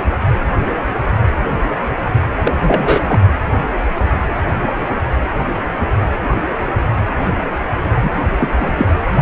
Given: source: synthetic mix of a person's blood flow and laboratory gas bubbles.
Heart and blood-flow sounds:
Doppler ultrasound of blood flow; precordium
2.43-2.52 s: bubbles
2.60-3.20 s: bubbles
8.02-8.11 s: bubbles
8.37-8.87 s: bubbles
From the record:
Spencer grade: 1 (occasional bubble signal discernible with the cardiac motion signal, with majority of cardiac periods free of bubbles); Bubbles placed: anywhere in the cardiac cycle

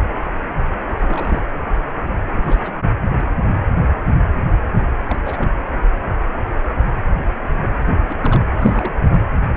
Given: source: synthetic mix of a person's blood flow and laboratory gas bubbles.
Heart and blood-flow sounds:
Doppler ultrasound of blood flow; precordium
0.89-0.96 s: bubbles
0.99-1.43 s: bubbles
2.33-2.74 s: bubbles
4.99-5.04 s: bubbles
5.07-5.18 s: bubbles
5.25-5.56 s: bubbles
8.09-8.15 s: bubbles
8.21-8.41 s: bubbles
8.56-9.00 s: bubbles
9.07-9.24 s: bubbles
From the record:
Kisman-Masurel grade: 221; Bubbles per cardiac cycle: several, 3 to 8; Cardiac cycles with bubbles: 10 to 50%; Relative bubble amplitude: barely perceptible (0.100 to 0.250); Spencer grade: 2 (many but less than half of the cardiac periods contain bubble signals, singularly or in groups); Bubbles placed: anywhere in the cardiac cycle

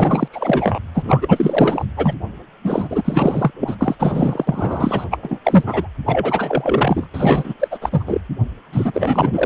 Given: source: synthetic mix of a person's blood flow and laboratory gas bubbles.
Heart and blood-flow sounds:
Doppler ultrasound of blood flow; precordium
0.00-0.28 s: bubbles
0.32-0.79 s: bubbles
0.95-1.86 s: bubbles
1.97-2.14 s: bubbles
2.64-3.51 s: bubbles
3.59-3.75 s: bubbles
3.79-3.96 s: bubbles
3.99-5.04 s: bubbles
5.10-5.18 s: bubbles
5.22-5.39 s: bubbles
5.43-5.63 s: bubbles
5.66-5.87 s: bubbles
6.05-7.07 s: bubbles
7.13-7.54 s: bubbles
7.60-7.68 s: bubbles
7.71-7.78 s: bubbles
7.81-8.03 s: bubbles
8.06-8.21 s: bubbles
8.72-9.46 s: bubbles
From the record:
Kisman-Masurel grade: 444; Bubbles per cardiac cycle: continuous sound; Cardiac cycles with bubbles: 100%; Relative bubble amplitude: maximal (0.775 to 0.999); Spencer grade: 4 (maximum detectable bubble signal sounding continuously throughout systole and diastole of every cardiac period, and overriding the amplitude of the normal cardiac signals); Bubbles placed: anywhere in the cardiac cycle

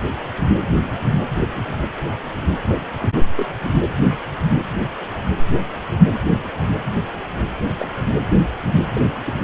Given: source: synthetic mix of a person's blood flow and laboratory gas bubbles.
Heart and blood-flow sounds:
Doppler ultrasound of blood flow; precordium
2.95-3.08 s: bubbles
3.37-3.56 s: bubbles
4.10-4.18 s: bubbles
7.78-7.88 s: bubbles
8.93-9.01 s: bubbles
9.26-9.33 s: bubbles
From the record:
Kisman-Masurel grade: 121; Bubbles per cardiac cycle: 1 to 2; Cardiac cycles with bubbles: 10 to 50%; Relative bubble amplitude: barely perceptible (0.100 to 0.250); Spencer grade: 2 (many but less than half of the cardiac periods contain bubble signals, singularly or in groups); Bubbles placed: anywhere in the cardiac cycle

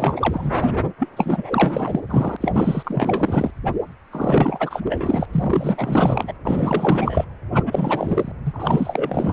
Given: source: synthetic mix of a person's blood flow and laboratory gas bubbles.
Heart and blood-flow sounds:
Doppler ultrasound of blood flow; precordium
0.00-0.57 s: bubbles
0.98-1.08 s: bubbles
1.16-2.00 s: bubbles
2.08-2.37 s: bubbles
2.40-3.51 s: bubbles
4.11-4.80 s: bubbles
4.88-5.25 s: bubbles
5.32-6.33 s: bubbles
6.45-7.25 s: bubbles
7.54-8.32 s: bubbles
8.45-9.33 s: bubbles
From the record:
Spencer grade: 4 (maximum detectable bubble signal sounding continuously throughout systole and diastole of every cardiac period, and overriding the amplitude of the normal cardiac signals); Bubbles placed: anywhere in the cardiac cycle

